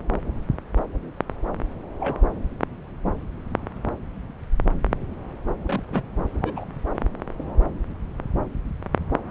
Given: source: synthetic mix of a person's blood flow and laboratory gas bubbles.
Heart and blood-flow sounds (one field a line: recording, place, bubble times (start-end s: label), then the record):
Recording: Doppler ultrasound of blood flow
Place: subclavian vein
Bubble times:
2.00-2.15 s: bubbles
5.67-5.82 s: bubbles
5.92-6.02 s: bubbles
6.42-6.65 s: bubbles
From the record:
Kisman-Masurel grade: 121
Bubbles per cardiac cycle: 1 to 2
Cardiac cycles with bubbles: 10 to 50%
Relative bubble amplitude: barely perceptible (0.100 to 0.250)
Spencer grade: 2 (many but less than half of the cardiac periods contain bubble signals, singularly or in groups)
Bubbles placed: anywhere in the cardiac cycle